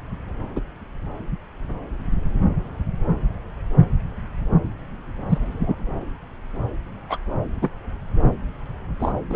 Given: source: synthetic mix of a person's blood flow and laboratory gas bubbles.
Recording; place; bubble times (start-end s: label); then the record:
Doppler ultrasound of blood flow; subclavian vein
0.55-0.60 s: bubbles
5.29-5.82 s: bubbles
7.08-7.18 s: bubbles
7.62-7.70 s: bubbles
8.99-9.13 s: bubbles
9.29-9.36 s: bubbles
From the record:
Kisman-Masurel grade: 123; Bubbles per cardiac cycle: 1 to 2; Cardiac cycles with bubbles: 10 to 50%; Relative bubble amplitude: loud (0.450 to 0.775); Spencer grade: 2 (many but less than half of the cardiac periods contain bubble signals, singularly or in groups); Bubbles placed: anywhere in the cardiac cycle